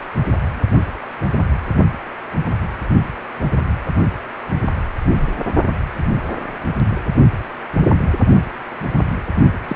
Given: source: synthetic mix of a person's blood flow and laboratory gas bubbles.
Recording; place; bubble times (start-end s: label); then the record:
Doppler ultrasound of blood flow; precordium
5.09-5.29 s: bubbles
9.68-9.76 s: bubbles
From the record:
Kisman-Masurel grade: 122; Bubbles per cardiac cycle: 1 to 2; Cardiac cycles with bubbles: 10 to 50%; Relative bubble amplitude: moderate (0.250 to 0.450); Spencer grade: 2 (many but less than half of the cardiac periods contain bubble signals, singularly or in groups); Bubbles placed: only in the low amplitude regions of the cardiac cycle